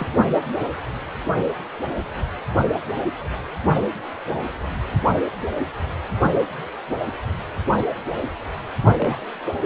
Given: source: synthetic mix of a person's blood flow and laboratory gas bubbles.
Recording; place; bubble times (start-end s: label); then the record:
Doppler ultrasound of blood flow; precordium
0.00-0.07 s: bubbles
9.01-9.24 s: bubbles
From the record:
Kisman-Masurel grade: 121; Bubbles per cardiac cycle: 1 to 2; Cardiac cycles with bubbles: 10 to 50%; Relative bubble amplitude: barely perceptible (0.100 to 0.250); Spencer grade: 2 (many but less than half of the cardiac periods contain bubble signals, singularly or in groups); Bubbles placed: only in the low amplitude regions of the cardiac cycle